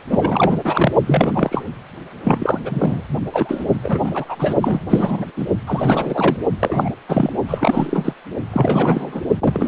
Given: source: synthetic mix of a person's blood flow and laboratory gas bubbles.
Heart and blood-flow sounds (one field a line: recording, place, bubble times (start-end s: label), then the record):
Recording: Doppler ultrasound of blood flow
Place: precordium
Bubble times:
0.09-0.57 s: bubbles
0.64-0.92 s: bubbles
1.06-1.64 s: bubbles
2.24-2.58 s: bubbles
2.65-3.03 s: bubbles
3.32-3.64 s: bubbles
3.82-4.54 s: bubbles
4.61-4.80 s: bubbles
4.89-5.25 s: bubbles
5.36-5.47 s: bubbles
5.67-6.36 s: bubbles
6.59-6.89 s: bubbles
7.09-7.32 s: bubbles
7.47-8.13 s: bubbles
8.52-9.21 s: bubbles
9.39-9.68 s: bubbles
From the record:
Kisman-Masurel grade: 343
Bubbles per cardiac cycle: rolling drumbeat, 9 or more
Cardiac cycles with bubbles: 100%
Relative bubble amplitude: loud (0.450 to 0.775)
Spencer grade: 3 (all of the cardiac periods contain showers or single bubble signals, but not dominating or overriding the cardiac motion signals)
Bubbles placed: only in the low amplitude regions of the cardiac cycle